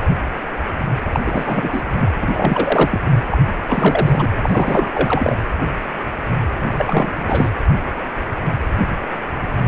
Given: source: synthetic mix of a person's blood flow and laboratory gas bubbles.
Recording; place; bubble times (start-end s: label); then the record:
Doppler ultrasound of blood flow; precordium
1.12-1.20 s: bubbles
1.26-1.69 s: bubbles
1.72-1.82 s: bubbles
1.95-2.08 s: bubbles
2.21-3.11 s: bubbles
3.30-3.38 s: bubbles
3.67-4.29 s: bubbles
4.42-5.36 s: bubbles
6.54-7.52 s: bubbles
From the record:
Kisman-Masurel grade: 333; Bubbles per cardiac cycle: rolling drumbeat, 9 or more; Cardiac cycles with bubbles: 50 to 99%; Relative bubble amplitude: loud (0.450 to 0.775); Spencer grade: 3 (all of the cardiac periods contain showers or single bubble signals, but not dominating or overriding the cardiac motion signals); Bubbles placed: anywhere in the cardiac cycle